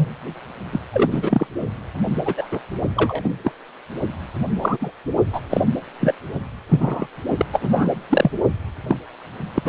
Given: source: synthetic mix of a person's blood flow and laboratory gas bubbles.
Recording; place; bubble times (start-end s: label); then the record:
Doppler ultrasound of blood flow; precordium
0.00-0.15 s: bubbles
0.72-0.80 s: bubbles
0.93-1.46 s: bubbles
2.25-2.34 s: bubbles
2.37-2.46 s: bubbles
2.51-2.59 s: bubbles
2.96-3.34 s: bubbles
3.44-3.52 s: bubbles
4.61-4.77 s: bubbles
4.81-4.91 s: bubbles
5.33-5.41 s: bubbles
5.50-5.62 s: bubbles
6.00-6.15 s: bubbles
6.69-7.07 s: bubbles
7.37-7.46 s: bubbles
7.53-7.88 s: bubbles
8.10-8.31 s: bubbles
8.87-8.96 s: bubbles
9.54-9.69 s: bubbles
From the record:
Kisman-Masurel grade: 243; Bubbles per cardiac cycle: several, 3 to 8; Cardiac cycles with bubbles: 100%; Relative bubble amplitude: loud (0.450 to 0.775); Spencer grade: 3 (all of the cardiac periods contain showers or single bubble signals, but not dominating or overriding the cardiac motion signals); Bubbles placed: only in the low amplitude regions of the cardiac cycle